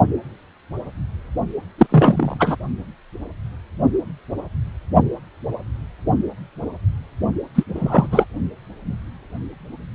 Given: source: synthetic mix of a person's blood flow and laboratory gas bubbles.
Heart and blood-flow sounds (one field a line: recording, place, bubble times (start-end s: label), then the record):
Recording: Doppler ultrasound of blood flow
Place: precordium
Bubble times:
1.78-1.86 s: bubbles
1.89-2.37 s: bubbles
2.40-2.56 s: bubbles
7.54-7.63 s: bubbles
7.75-8.07 s: bubbles
8.12-8.25 s: bubbles
From the record:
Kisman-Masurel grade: 223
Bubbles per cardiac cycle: several, 3 to 8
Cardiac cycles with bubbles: 10 to 50%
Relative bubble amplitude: loud (0.450 to 0.775)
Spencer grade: 2 (many but less than half of the cardiac periods contain bubble signals, singularly or in groups)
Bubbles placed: only in the low amplitude regions of the cardiac cycle